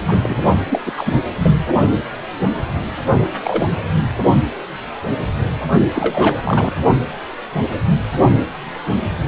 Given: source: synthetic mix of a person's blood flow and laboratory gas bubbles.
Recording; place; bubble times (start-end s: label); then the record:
Doppler ultrasound of blood flow; precordium
0.08-0.43 s: bubbles
0.71-0.81 s: bubbles
0.85-0.93 s: bubbles
0.97-1.15 s: bubbles
1.43-1.54 s: bubbles
3.42-3.66 s: bubbles
3.70-3.76 s: bubbles
5.94-6.41 s: bubbles
6.44-6.71 s: bubbles
From the record:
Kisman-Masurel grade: 222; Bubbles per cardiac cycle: several, 3 to 8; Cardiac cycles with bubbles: 10 to 50%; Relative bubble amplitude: moderate (0.250 to 0.450); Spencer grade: 2 (many but less than half of the cardiac periods contain bubble signals, singularly or in groups); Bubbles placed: only in the low amplitude regions of the cardiac cycle